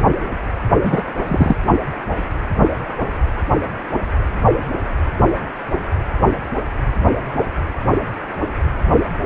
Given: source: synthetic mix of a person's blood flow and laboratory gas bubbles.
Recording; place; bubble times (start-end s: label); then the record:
Doppler ultrasound of blood flow; precordium
0.83-1.04 s: bubbles
1.28-1.56 s: bubbles
From the record:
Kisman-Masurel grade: 123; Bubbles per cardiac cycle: 1 to 2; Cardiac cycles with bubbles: 10 to 50%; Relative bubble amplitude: loud (0.450 to 0.775); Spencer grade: 2 (many but less than half of the cardiac periods contain bubble signals, singularly or in groups); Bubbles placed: anywhere in the cardiac cycle